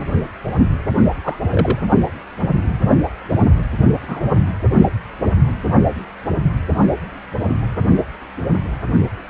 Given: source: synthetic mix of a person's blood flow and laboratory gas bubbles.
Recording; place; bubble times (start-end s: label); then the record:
Doppler ultrasound of blood flow; precordium
1.24-1.37 s: bubbles
1.50-1.80 s: bubbles
3.32-3.38 s: bubbles
4.07-4.35 s: bubbles
From the record:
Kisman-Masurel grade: 122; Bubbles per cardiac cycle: 1 to 2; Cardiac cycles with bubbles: 10 to 50%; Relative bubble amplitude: moderate (0.250 to 0.450); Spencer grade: 2 (many but less than half of the cardiac periods contain bubble signals, singularly or in groups); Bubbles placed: only in the low amplitude regions of the cardiac cycle